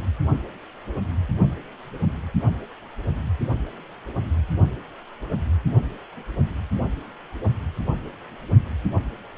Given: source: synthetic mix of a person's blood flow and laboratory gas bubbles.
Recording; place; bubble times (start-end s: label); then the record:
Doppler ultrasound of blood flow; precordium
no bubbles
From the record:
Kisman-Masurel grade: 000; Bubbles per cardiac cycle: 0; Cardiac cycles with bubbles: 0%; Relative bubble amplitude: no bubbles discernible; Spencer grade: 0 (complete lack of bubble signals)